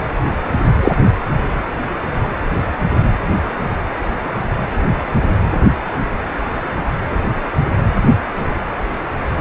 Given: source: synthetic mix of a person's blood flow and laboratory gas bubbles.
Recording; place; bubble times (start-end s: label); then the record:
Doppler ultrasound of blood flow; precordium
0.81-0.92 s: bubbles
From the record:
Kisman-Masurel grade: 123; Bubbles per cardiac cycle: 1 to 2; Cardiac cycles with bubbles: 10 to 50%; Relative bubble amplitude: loud (0.450 to 0.775); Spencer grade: 2 (many but less than half of the cardiac periods contain bubble signals, singularly or in groups); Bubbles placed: anywhere in the cardiac cycle